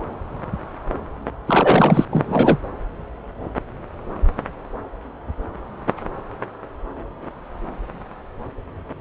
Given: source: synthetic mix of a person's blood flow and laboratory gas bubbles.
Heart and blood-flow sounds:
Doppler ultrasound of blood flow; subclavian vein
1.47-2.05 s: bubbles
2.12-2.58 s: bubbles
From the record:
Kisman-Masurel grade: 223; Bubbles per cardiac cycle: several, 3 to 8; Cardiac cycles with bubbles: 10 to 50%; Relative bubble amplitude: loud (0.450 to 0.775); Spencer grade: 2 (many but less than half of the cardiac periods contain bubble signals, singularly or in groups); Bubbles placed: anywhere in the cardiac cycle

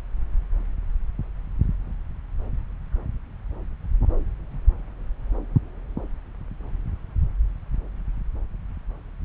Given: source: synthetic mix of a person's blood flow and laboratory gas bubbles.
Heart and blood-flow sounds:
Doppler ultrasound of blood flow; subclavian vein
no bubbles
From the record:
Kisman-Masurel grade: 000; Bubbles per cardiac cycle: 0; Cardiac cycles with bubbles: 0%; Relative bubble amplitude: no bubbles discernible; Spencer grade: 0 (complete lack of bubble signals)

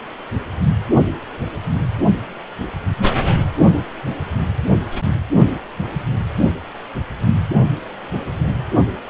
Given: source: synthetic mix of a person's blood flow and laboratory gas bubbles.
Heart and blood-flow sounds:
Doppler ultrasound of blood flow; precordium
6.38-6.50 s: bubbles
From the record:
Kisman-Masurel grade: 112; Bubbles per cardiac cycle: 1 to 2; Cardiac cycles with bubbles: 1 to 10%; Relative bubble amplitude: moderate (0.250 to 0.450); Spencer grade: 1 (occasional bubble signal discernible with the cardiac motion signal, with majority of cardiac periods free of bubbles); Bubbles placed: only in the low amplitude regions of the cardiac cycle

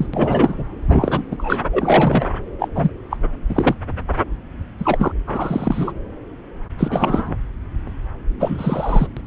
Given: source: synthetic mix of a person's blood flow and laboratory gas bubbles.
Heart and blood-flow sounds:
Doppler ultrasound of blood flow; subclavian vein
0.00-0.06 s: bubbles
0.13-0.63 s: bubbles
0.89-1.22 s: bubbles
1.31-1.65 s: bubbles
1.72-2.27 s: bubbles
2.59-2.69 s: bubbles
2.75-2.91 s: bubbles
3.10-3.17 s: bubbles
3.49-3.75 s: bubbles
4.79-5.12 s: bubbles
5.27-5.92 s: bubbles
6.78-7.36 s: bubbles
8.39-9.07 s: bubbles
9.17-9.21 s: bubbles
From the record:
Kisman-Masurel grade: 233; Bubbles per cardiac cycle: several, 3 to 8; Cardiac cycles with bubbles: 50 to 99%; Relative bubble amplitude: loud (0.450 to 0.775); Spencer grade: 3 (all of the cardiac periods contain showers or single bubble signals, but not dominating or overriding the cardiac motion signals); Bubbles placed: anywhere in the cardiac cycle

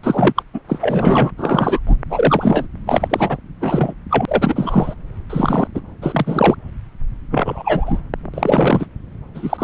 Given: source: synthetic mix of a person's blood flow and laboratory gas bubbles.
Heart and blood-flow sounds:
Doppler ultrasound of blood flow; subclavian vein
0.03-0.33 s: bubbles
0.35-0.42 s: bubbles
0.53-0.60 s: bubbles
0.68-0.78 s: bubbles
0.81-1.31 s: bubbles
1.38-1.80 s: bubbles
1.86-1.97 s: bubbles
2.09-2.67 s: bubbles
2.86-3.37 s: bubbles
3.60-3.93 s: bubbles
4.09-4.94 s: bubbles
5.29-5.67 s: bubbles
5.75-5.81 s: bubbles
6.01-6.55 s: bubbles
7.30-8.01 s: bubbles
8.34-8.86 s: bubbles
9.35-9.64 s: bubbles
From the record:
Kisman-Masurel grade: 243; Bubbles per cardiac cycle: several, 3 to 8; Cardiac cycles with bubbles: 100%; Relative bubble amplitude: loud (0.450 to 0.775); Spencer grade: 3 (all of the cardiac periods contain showers or single bubble signals, but not dominating or overriding the cardiac motion signals); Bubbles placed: anywhere in the cardiac cycle

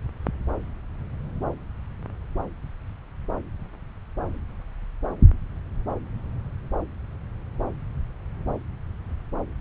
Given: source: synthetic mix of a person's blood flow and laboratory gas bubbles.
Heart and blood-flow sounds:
Doppler ultrasound of blood flow; subclavian vein
no bubbles
From the record:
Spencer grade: 0 (complete lack of bubble signals)

